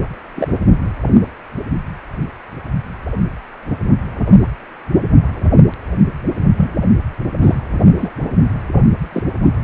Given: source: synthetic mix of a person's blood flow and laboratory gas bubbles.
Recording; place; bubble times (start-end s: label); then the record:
Doppler ultrasound of blood flow; precordium
0.36-0.49 s: bubbles
6.57-6.71 s: bubbles
7.42-7.56 s: bubbles
7.98-8.12 s: bubbles
9.12-9.23 s: bubbles
From the record:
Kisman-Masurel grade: 123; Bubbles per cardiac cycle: 1 to 2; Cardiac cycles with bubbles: 10 to 50%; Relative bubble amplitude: loud (0.450 to 0.775); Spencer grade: 2 (many but less than half of the cardiac periods contain bubble signals, singularly or in groups); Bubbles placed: only in the low amplitude regions of the cardiac cycle